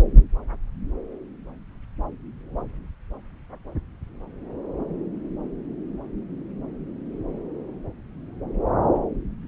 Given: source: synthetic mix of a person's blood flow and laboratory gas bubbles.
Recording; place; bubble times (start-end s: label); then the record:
Doppler ultrasound of blood flow; subclavian vein
no bubbles
From the record:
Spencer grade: 0 (complete lack of bubble signals)